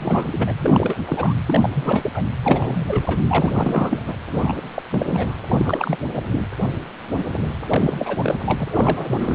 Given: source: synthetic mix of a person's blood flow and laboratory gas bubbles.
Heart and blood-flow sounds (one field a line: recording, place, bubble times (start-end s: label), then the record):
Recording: Doppler ultrasound of blood flow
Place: precordium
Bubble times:
0.00-0.52 s: bubbles
0.61-0.98 s: bubbles
1.06-1.33 s: bubbles
1.46-1.70 s: bubbles
1.73-2.10 s: bubbles
2.14-2.22 s: bubbles
2.44-3.23 s: bubbles
3.28-4.03 s: bubbles
4.06-4.15 s: bubbles
4.29-4.82 s: bubbles
4.91-5.35 s: bubbles
5.46-5.98 s: bubbles
6.14-6.22 s: bubbles
6.32-6.46 s: bubbles
7.69-8.17 s: bubbles
8.21-8.35 s: bubbles
8.46-8.56 s: bubbles
8.59-8.68 s: bubbles
8.70-9.35 s: bubbles
From the record:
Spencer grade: 3 (all of the cardiac periods contain showers or single bubble signals, but not dominating or overriding the cardiac motion signals)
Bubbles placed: anywhere in the cardiac cycle